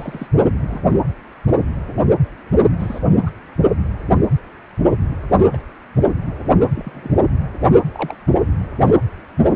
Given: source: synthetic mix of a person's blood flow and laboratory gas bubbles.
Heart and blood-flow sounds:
Doppler ultrasound of blood flow; precordium
0.00-0.27 s: bubbles
0.67-0.81 s: bubbles
2.79-2.99 s: bubbles
3.26-3.31 s: bubbles
5.53-5.57 s: bubbles
6.75-7.11 s: bubbles
7.92-8.16 s: bubbles
From the record:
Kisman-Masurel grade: 121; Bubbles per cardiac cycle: 1 to 2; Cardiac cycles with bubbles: 10 to 50%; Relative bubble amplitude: barely perceptible (0.100 to 0.250); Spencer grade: 2 (many but less than half of the cardiac periods contain bubble signals, singularly or in groups); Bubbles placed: only in the low amplitude regions of the cardiac cycle

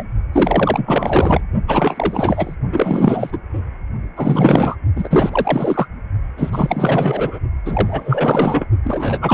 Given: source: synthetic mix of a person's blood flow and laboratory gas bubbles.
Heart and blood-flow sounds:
Doppler ultrasound of blood flow; precordium
0.00-0.03 s: bubbles
0.33-1.42 s: bubbles
1.68-2.55 s: bubbles
2.72-3.37 s: bubbles
4.16-4.76 s: bubbles
4.96-5.87 s: bubbles
6.36-7.39 s: bubbles
7.65-8.66 s: bubbles
8.84-9.34 s: bubbles
From the record:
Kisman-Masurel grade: 444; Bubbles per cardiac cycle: continuous sound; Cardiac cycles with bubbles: 100%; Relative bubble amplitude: maximal (0.775 to 0.999); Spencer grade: 4 (maximum detectable bubble signal sounding continuously throughout systole and diastole of every cardiac period, and overriding the amplitude of the normal cardiac signals); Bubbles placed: only in the low amplitude regions of the cardiac cycle

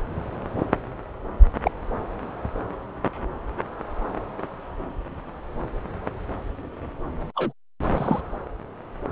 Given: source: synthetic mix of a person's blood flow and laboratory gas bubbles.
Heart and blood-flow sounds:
Doppler ultrasound of blood flow; subclavian vein
1.64-1.71 s: bubbles
7.36-7.52 s: bubbles
7.97-8.21 s: bubbles
From the record:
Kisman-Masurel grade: 122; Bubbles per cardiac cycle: 1 to 2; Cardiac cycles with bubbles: 10 to 50%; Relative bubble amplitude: moderate (0.250 to 0.450); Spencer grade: 2 (many but less than half of the cardiac periods contain bubble signals, singularly or in groups); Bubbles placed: anywhere in the cardiac cycle

